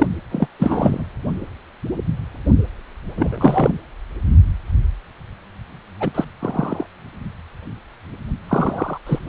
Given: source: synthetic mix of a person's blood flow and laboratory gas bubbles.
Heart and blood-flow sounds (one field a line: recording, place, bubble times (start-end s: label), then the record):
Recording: Doppler ultrasound of blood flow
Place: precordium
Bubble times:
0.00-0.08 s: bubbles
0.31-0.48 s: bubbles
0.59-1.05 s: bubbles
3.17-3.77 s: bubbles
6.00-6.25 s: bubbles
6.39-6.87 s: bubbles
8.48-8.98 s: bubbles
9.07-9.19 s: bubbles
From the record:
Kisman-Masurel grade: 233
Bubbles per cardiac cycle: several, 3 to 8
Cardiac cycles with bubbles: 50 to 99%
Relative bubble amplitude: loud (0.450 to 0.775)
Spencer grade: 3 (all of the cardiac periods contain showers or single bubble signals, but not dominating or overriding the cardiac motion signals)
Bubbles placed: only in the low amplitude regions of the cardiac cycle